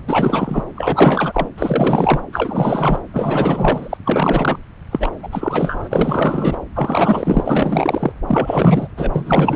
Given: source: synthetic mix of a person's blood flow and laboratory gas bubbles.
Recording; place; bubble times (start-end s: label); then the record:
Doppler ultrasound of blood flow; subclavian vein
0.07-0.65 s: bubbles
0.76-1.49 s: bubbles
1.58-2.20 s: bubbles
2.32-2.98 s: bubbles
3.13-3.97 s: bubbles
4.04-4.59 s: bubbles
4.91-5.12 s: bubbles
5.22-5.29 s: bubbles
5.31-6.58 s: bubbles
6.75-8.13 s: bubbles
8.27-8.88 s: bubbles
8.97-9.11 s: bubbles
9.13-9.56 s: bubbles
From the record:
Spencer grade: 4 (maximum detectable bubble signal sounding continuously throughout systole and diastole of every cardiac period, and overriding the amplitude of the normal cardiac signals); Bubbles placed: anywhere in the cardiac cycle